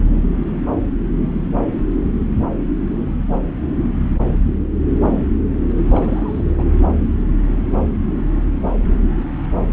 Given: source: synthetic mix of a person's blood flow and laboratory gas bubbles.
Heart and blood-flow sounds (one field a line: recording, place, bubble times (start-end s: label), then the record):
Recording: Doppler ultrasound of blood flow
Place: subclavian vein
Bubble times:
5.90-6.52 s: bubbles
6.57-6.64 s: bubbles
From the record:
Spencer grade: 1 (occasional bubble signal discernible with the cardiac motion signal, with majority of cardiac periods free of bubbles)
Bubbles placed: anywhere in the cardiac cycle